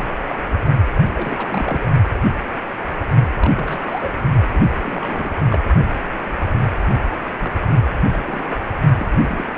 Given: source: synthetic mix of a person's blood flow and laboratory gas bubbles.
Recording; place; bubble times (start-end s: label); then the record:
Doppler ultrasound of blood flow; precordium
0.00-0.09 s: bubbles
0.28-0.39 s: bubbles
1.13-1.89 s: bubbles
3.38-4.10 s: bubbles
4.54-4.60 s: bubbles
4.79-5.36 s: bubbles
5.50-5.59 s: bubbles
7.38-7.55 s: bubbles
7.61-7.79 s: bubbles
8.12-8.22 s: bubbles
8.25-8.58 s: bubbles
8.98-9.06 s: bubbles
9.21-9.51 s: bubbles
From the record:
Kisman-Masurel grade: 232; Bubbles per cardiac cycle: several, 3 to 8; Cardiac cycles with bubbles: 50 to 99%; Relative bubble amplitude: moderate (0.250 to 0.450); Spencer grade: 3 (all of the cardiac periods contain showers or single bubble signals, but not dominating or overriding the cardiac motion signals); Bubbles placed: only in the low amplitude regions of the cardiac cycle